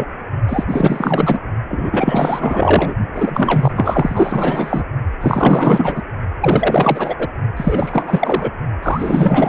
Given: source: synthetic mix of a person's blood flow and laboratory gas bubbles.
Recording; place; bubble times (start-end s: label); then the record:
Doppler ultrasound of blood flow; precordium
0.00-0.05 s: bubbles
0.48-0.64 s: bubbles
0.69-1.40 s: bubbles
1.69-2.94 s: bubbles
3.14-4.84 s: bubbles
5.21-6.02 s: bubbles
6.41-7.15 s: bubbles
7.19-7.27 s: bubbles
7.56-8.51 s: bubbles
8.83-9.49 s: bubbles
From the record:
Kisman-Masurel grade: 444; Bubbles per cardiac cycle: continuous sound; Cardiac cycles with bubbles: 100%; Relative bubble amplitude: maximal (0.775 to 0.999); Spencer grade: 4 (maximum detectable bubble signal sounding continuously throughout systole and diastole of every cardiac period, and overriding the amplitude of the normal cardiac signals); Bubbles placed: only in the low amplitude regions of the cardiac cycle